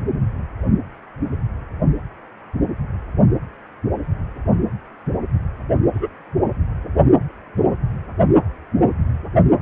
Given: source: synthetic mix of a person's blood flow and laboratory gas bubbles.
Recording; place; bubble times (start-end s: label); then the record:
Doppler ultrasound of blood flow; precordium
5.93-6.10 s: bubbles
From the record:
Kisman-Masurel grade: 113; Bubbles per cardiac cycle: 1 to 2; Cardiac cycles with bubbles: 1 to 10%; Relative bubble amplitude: loud (0.450 to 0.775); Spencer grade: 1 (occasional bubble signal discernible with the cardiac motion signal, with majority of cardiac periods free of bubbles); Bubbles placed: anywhere in the cardiac cycle